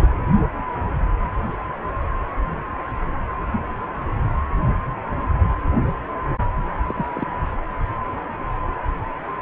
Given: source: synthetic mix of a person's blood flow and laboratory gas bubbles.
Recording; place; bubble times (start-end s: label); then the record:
Doppler ultrasound of blood flow; precordium
0.00-0.07 s: bubbles
6.87-7.05 s: bubbles
7.15-7.26 s: bubbles
From the record:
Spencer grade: 2 (many but less than half of the cardiac periods contain bubble signals, singularly or in groups); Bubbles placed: only in the low amplitude regions of the cardiac cycle